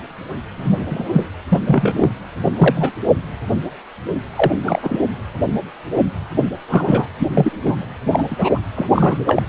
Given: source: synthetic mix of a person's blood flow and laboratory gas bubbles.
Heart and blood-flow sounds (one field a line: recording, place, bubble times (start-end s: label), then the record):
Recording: Doppler ultrasound of blood flow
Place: precordium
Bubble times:
0.57-1.29 s: bubbles
1.49-1.59 s: bubbles
1.67-2.10 s: bubbles
2.44-2.52 s: bubbles
2.58-2.96 s: bubbles
4.36-4.58 s: bubbles
4.65-4.98 s: bubbles
6.68-7.08 s: bubbles
7.18-7.28 s: bubbles
7.33-7.88 s: bubbles
8.11-8.25 s: bubbles
8.30-8.59 s: bubbles
8.75-8.87 s: bubbles
8.91-9.42 s: bubbles
From the record:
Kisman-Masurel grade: 233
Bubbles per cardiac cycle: several, 3 to 8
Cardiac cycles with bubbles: 50 to 99%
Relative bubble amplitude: loud (0.450 to 0.775)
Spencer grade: 3 (all of the cardiac periods contain showers or single bubble signals, but not dominating or overriding the cardiac motion signals)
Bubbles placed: anywhere in the cardiac cycle